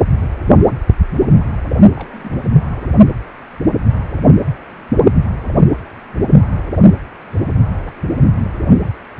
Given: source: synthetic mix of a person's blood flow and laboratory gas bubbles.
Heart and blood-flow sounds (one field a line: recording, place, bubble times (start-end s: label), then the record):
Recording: Doppler ultrasound of blood flow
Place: precordium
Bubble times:
1.96-2.08 s: bubbles
2.12-2.52 s: bubbles
2.65-2.69 s: bubbles
From the record:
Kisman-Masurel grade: 211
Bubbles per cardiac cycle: several, 3 to 8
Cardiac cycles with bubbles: 1 to 10%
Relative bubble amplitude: barely perceptible (0.100 to 0.250)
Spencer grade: 1 (occasional bubble signal discernible with the cardiac motion signal, with majority of cardiac periods free of bubbles)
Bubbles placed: anywhere in the cardiac cycle